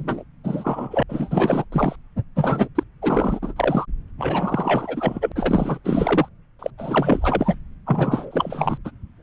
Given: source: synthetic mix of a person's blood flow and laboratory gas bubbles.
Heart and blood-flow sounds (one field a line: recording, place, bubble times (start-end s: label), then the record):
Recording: Doppler ultrasound of blood flow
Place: subclavian vein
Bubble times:
0.00-0.24 s: bubbles
0.43-1.03 s: bubbles
1.08-1.65 s: bubbles
1.72-1.96 s: bubbles
2.35-2.68 s: bubbles
2.75-2.83 s: bubbles
3.01-3.54 s: bubbles
3.56-3.86 s: bubbles
4.18-5.32 s: bubbles
5.35-5.79 s: bubbles
5.83-6.29 s: bubbles
6.59-6.71 s: bubbles
6.77-7.55 s: bubbles
7.85-8.78 s: bubbles
8.85-8.91 s: bubbles
From the record:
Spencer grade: 4 (maximum detectable bubble signal sounding continuously throughout systole and diastole of every cardiac period, and overriding the amplitude of the normal cardiac signals)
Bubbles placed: anywhere in the cardiac cycle